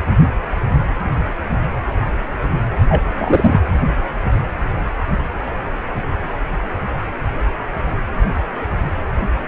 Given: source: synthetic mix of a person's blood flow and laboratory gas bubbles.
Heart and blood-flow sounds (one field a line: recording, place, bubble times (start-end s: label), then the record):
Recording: Doppler ultrasound of blood flow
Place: precordium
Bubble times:
2.88-3.04 s: bubbles
3.18-3.62 s: bubbles
From the record:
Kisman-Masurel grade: 213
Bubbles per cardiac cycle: several, 3 to 8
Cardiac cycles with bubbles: 1 to 10%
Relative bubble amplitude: loud (0.450 to 0.775)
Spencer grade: 1 (occasional bubble signal discernible with the cardiac motion signal, with majority of cardiac periods free of bubbles)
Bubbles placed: anywhere in the cardiac cycle